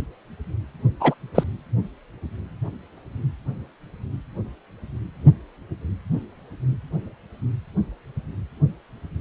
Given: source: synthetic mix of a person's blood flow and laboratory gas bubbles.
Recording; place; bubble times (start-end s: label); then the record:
Doppler ultrasound of blood flow; precordium
1.00-1.15 s: bubbles
1.34-1.44 s: bubbles
From the record:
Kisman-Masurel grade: 123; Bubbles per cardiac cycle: 1 to 2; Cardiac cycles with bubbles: 10 to 50%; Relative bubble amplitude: loud (0.450 to 0.775); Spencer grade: 2 (many but less than half of the cardiac periods contain bubble signals, singularly or in groups); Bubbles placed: anywhere in the cardiac cycle